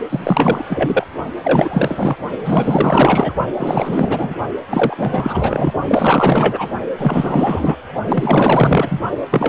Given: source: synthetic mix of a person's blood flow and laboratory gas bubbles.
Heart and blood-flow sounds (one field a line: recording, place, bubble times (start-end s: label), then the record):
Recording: Doppler ultrasound of blood flow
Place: precordium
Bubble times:
0.10-0.65 s: bubbles
0.69-1.07 s: bubbles
1.43-2.16 s: bubbles
2.44-3.33 s: bubbles
3.58-4.36 s: bubbles
4.70-5.72 s: bubbles
5.88-6.69 s: bubbles
6.97-7.77 s: bubbles
8.07-9.00 s: bubbles
9.31-9.48 s: bubbles
From the record:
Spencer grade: 4 (maximum detectable bubble signal sounding continuously throughout systole and diastole of every cardiac period, and overriding the amplitude of the normal cardiac signals)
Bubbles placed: only in the low amplitude regions of the cardiac cycle